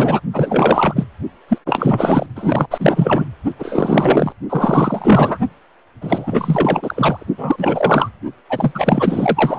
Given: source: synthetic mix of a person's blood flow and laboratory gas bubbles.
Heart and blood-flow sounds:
Doppler ultrasound of blood flow; precordium
0.00-0.20 s: bubbles
0.33-1.04 s: bubbles
1.48-1.58 s: bubbles
1.66-2.26 s: bubbles
2.35-2.67 s: bubbles
2.71-3.25 s: bubbles
3.58-4.33 s: bubbles
4.49-5.38 s: bubbles
6.01-7.26 s: bubbles
7.38-8.10 s: bubbles
8.49-9.59 s: bubbles
From the record:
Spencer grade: 4 (maximum detectable bubble signal sounding continuously throughout systole and diastole of every cardiac period, and overriding the amplitude of the normal cardiac signals); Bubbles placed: only in the low amplitude regions of the cardiac cycle

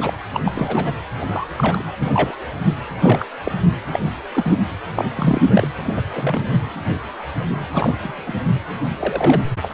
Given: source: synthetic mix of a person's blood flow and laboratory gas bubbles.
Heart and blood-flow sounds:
Doppler ultrasound of blood flow; precordium
0.00-0.13 s: bubbles
0.33-0.40 s: bubbles
0.45-0.95 s: bubbles
1.20-1.26 s: bubbles
1.30-1.48 s: bubbles
1.57-1.85 s: bubbles
2.01-2.36 s: bubbles
2.98-3.26 s: bubbles
3.45-3.52 s: bubbles
3.92-4.00 s: bubbles
4.34-4.54 s: bubbles
4.95-5.05 s: bubbles
5.15-5.68 s: bubbles
5.83-6.01 s: bubbles
6.15-6.50 s: bubbles
7.72-7.95 s: bubbles
8.01-8.35 s: bubbles
8.99-9.42 s: bubbles
9.62-9.73 s: bubbles
From the record:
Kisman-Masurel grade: 232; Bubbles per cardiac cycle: several, 3 to 8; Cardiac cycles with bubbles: 50 to 99%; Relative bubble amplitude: moderate (0.250 to 0.450); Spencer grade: 3 (all of the cardiac periods contain showers or single bubble signals, but not dominating or overriding the cardiac motion signals); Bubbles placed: anywhere in the cardiac cycle

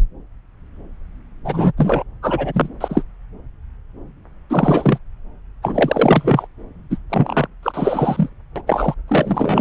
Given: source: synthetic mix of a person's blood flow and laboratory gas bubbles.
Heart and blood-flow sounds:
Doppler ultrasound of blood flow; subclavian vein
1.44-1.72 s: bubbles
1.77-2.03 s: bubbles
2.22-2.69 s: bubbles
2.80-3.02 s: bubbles
4.50-4.98 s: bubbles
5.62-6.47 s: bubbles
6.89-6.97 s: bubbles
7.09-7.47 s: bubbles
7.62-8.29 s: bubbles
8.56-8.62 s: bubbles
8.67-8.95 s: bubbles
9.08-9.61 s: bubbles
From the record:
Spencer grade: 3 (all of the cardiac periods contain showers or single bubble signals, but not dominating or overriding the cardiac motion signals); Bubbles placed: anywhere in the cardiac cycle

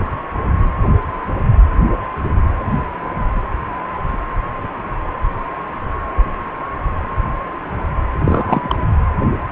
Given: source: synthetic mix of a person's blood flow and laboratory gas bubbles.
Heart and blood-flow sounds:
Doppler ultrasound of blood flow; precordium
8.18-8.75 s: bubbles
From the record:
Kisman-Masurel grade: 212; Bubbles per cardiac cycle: several, 3 to 8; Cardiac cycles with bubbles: 1 to 10%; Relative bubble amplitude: moderate (0.250 to 0.450); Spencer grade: 1 (occasional bubble signal discernible with the cardiac motion signal, with majority of cardiac periods free of bubbles); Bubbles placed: anywhere in the cardiac cycle

